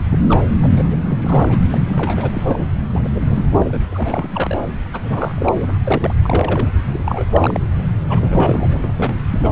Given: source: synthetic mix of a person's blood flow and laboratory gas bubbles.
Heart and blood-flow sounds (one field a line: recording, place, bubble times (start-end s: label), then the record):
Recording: Doppler ultrasound of blood flow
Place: subclavian vein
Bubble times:
0.10-0.24 s: bubbles
0.28-0.42 s: bubbles
0.62-1.01 s: bubbles
1.03-1.65 s: bubbles
1.71-1.81 s: bubbles
1.86-2.63 s: bubbles
2.95-3.08 s: bubbles
3.15-3.21 s: bubbles
3.25-3.46 s: bubbles
3.60-3.82 s: bubbles
3.91-4.61 s: bubbles
4.93-5.00 s: bubbles
5.03-5.67 s: bubbles
5.84-6.14 s: bubbles
6.22-6.71 s: bubbles
6.88-7.25 s: bubbles
7.33-7.60 s: bubbles
8.09-8.94 s: bubbles
8.97-9.14 s: bubbles
9.31-9.52 s: bubbles
From the record:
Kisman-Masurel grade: 342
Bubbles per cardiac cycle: rolling drumbeat, 9 or more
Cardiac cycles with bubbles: 100%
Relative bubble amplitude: moderate (0.250 to 0.450)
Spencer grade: 3 (all of the cardiac periods contain showers or single bubble signals, but not dominating or overriding the cardiac motion signals)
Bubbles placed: anywhere in the cardiac cycle